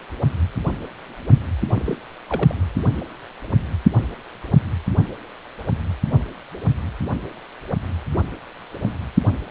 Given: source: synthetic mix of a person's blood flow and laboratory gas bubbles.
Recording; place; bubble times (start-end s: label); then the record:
Doppler ultrasound of blood flow; precordium
1.75-1.97 s: bubbles
2.29-2.55 s: bubbles
From the record:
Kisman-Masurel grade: 221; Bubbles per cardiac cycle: several, 3 to 8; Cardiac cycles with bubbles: 10 to 50%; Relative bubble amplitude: barely perceptible (0.100 to 0.250); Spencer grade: 2 (many but less than half of the cardiac periods contain bubble signals, singularly or in groups); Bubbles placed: only in the low amplitude regions of the cardiac cycle